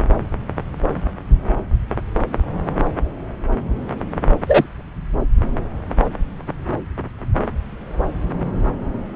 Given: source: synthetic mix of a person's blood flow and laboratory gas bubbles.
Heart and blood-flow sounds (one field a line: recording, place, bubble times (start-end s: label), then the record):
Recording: Doppler ultrasound of blood flow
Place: subclavian vein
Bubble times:
4.47-4.67 s: bubbles
From the record:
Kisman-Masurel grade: 113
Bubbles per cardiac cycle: 1 to 2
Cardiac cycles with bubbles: 1 to 10%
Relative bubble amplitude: loud (0.450 to 0.775)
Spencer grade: 1 (occasional bubble signal discernible with the cardiac motion signal, with majority of cardiac periods free of bubbles)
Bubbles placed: anywhere in the cardiac cycle